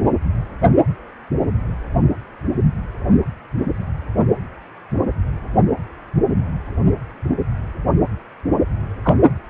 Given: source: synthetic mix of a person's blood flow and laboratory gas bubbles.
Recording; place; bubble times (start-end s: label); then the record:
Doppler ultrasound of blood flow; precordium
9.03-9.15 s: bubbles
From the record:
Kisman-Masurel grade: 113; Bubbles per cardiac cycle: 1 to 2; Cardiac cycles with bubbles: 1 to 10%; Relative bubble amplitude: loud (0.450 to 0.775); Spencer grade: 1 (occasional bubble signal discernible with the cardiac motion signal, with majority of cardiac periods free of bubbles); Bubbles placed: only in the low amplitude regions of the cardiac cycle